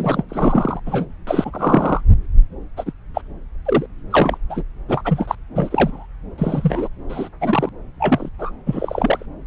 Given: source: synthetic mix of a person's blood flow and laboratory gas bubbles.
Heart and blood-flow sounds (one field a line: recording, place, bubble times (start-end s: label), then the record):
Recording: Doppler ultrasound of blood flow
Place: subclavian vein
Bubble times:
0.00-0.23 s: bubbles
0.29-0.80 s: bubbles
0.86-1.06 s: bubbles
1.27-2.01 s: bubbles
2.77-2.92 s: bubbles
3.14-3.21 s: bubbles
3.65-3.86 s: bubbles
4.10-4.38 s: bubbles
4.50-4.63 s: bubbles
4.88-5.35 s: bubbles
5.56-6.06 s: bubbles
6.38-6.89 s: bubbles
7.09-7.29 s: bubbles
7.40-7.69 s: bubbles
8.00-8.29 s: bubbles
8.38-8.51 s: bubbles
8.67-9.26 s: bubbles
From the record:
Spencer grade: 3 (all of the cardiac periods contain showers or single bubble signals, but not dominating or overriding the cardiac motion signals)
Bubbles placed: anywhere in the cardiac cycle